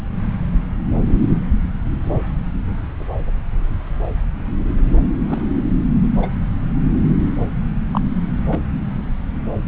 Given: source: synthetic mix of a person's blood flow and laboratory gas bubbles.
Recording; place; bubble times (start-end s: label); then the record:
Doppler ultrasound of blood flow; subclavian vein
5.28-5.42 s: bubbles
6.22-6.27 s: bubbles
7.91-8.01 s: bubbles
8.52-8.59 s: bubbles
From the record:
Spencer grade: 2 (many but less than half of the cardiac periods contain bubble signals, singularly or in groups); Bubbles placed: anywhere in the cardiac cycle